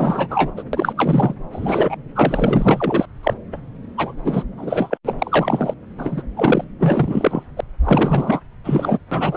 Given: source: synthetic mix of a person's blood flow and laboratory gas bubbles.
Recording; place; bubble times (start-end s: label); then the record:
Doppler ultrasound of blood flow; subclavian vein
0.00-0.51 s: bubbles
0.56-0.62 s: bubbles
0.73-0.93 s: bubbles
0.97-1.34 s: bubbles
1.52-1.96 s: bubbles
2.15-3.05 s: bubbles
3.23-3.34 s: bubbles
3.52-3.58 s: bubbles
3.97-4.14 s: bubbles
4.24-4.44 s: bubbles
4.57-4.98 s: bubbles
5.06-5.14 s: bubbles
5.19-5.74 s: bubbles
5.98-6.23 s: bubbles
6.37-6.65 s: bubbles
6.79-7.43 s: bubbles
7.57-7.60 s: bubbles
7.83-8.40 s: bubbles
8.64-8.99 s: bubbles
9.11-9.36 s: bubbles
From the record:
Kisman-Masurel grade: 444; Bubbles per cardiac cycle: continuous sound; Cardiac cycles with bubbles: 100%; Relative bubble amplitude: maximal (0.775 to 0.999); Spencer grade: 4 (maximum detectable bubble signal sounding continuously throughout systole and diastole of every cardiac period, and overriding the amplitude of the normal cardiac signals); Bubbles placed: anywhere in the cardiac cycle